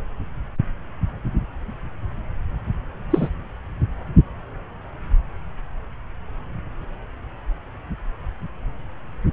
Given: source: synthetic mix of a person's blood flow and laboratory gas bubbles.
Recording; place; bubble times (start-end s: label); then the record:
Doppler ultrasound of blood flow; subclavian vein
3.10-3.29 s: bubbles
From the record:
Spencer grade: 2 (many but less than half of the cardiac periods contain bubble signals, singularly or in groups); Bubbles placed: anywhere in the cardiac cycle